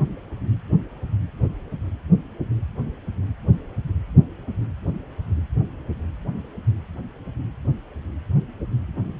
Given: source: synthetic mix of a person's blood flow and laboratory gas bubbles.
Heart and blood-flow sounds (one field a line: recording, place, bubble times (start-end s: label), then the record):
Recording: Doppler ultrasound of blood flow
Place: precordium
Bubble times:
no bubbles
From the record:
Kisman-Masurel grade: 000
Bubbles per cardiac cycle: 0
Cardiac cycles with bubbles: 0%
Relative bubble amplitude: no bubbles discernible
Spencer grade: 0 (complete lack of bubble signals)